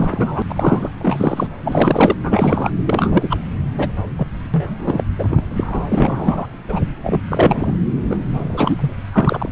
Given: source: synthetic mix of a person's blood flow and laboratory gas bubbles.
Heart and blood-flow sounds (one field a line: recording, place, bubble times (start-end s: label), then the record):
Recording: Doppler ultrasound of blood flow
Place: subclavian vein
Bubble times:
0.00-0.43 s: bubbles
0.49-0.90 s: bubbles
0.99-1.49 s: bubbles
1.63-2.15 s: bubbles
2.23-2.71 s: bubbles
2.86-3.38 s: bubbles
3.77-3.90 s: bubbles
4.18-4.27 s: bubbles
4.54-5.04 s: bubbles
5.19-5.47 s: bubbles
5.51-5.85 s: bubbles
5.89-6.47 s: bubbles
6.69-6.79 s: bubbles
7.04-7.22 s: bubbles
7.29-7.77 s: bubbles
8.10-8.17 s: bubbles
8.29-8.93 s: bubbles
9.13-9.49 s: bubbles
From the record:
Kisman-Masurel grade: 242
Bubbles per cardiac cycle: several, 3 to 8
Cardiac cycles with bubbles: 100%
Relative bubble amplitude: moderate (0.250 to 0.450)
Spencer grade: 3 (all of the cardiac periods contain showers or single bubble signals, but not dominating or overriding the cardiac motion signals)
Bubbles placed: anywhere in the cardiac cycle